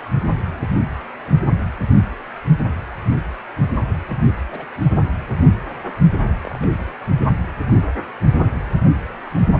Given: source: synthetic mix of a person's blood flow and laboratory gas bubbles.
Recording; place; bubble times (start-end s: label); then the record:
Doppler ultrasound of blood flow; precordium
2.90-2.95 s: bubbles
4.07-4.17 s: bubbles
4.50-4.66 s: bubbles
4.91-5.03 s: bubbles
6.45-6.58 s: bubbles
6.61-6.67 s: bubbles
8.54-8.77 s: bubbles
From the record:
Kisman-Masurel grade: 121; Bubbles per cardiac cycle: 1 to 2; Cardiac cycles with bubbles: 10 to 50%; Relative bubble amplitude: barely perceptible (0.100 to 0.250); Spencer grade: 2 (many but less than half of the cardiac periods contain bubble signals, singularly or in groups); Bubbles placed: only in the low amplitude regions of the cardiac cycle